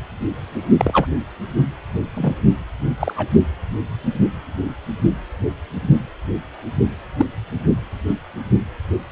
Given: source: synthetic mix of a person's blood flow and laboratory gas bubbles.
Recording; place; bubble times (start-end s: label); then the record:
Doppler ultrasound of blood flow; precordium
0.77-1.08 s: bubbles
2.14-2.35 s: bubbles
3.00-3.28 s: bubbles
7.17-7.26 s: bubbles
8.08-8.13 s: bubbles
From the record:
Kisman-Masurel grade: 122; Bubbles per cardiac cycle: 1 to 2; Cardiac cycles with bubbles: 10 to 50%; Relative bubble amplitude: moderate (0.250 to 0.450); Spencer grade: 2 (many but less than half of the cardiac periods contain bubble signals, singularly or in groups); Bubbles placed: only in the low amplitude regions of the cardiac cycle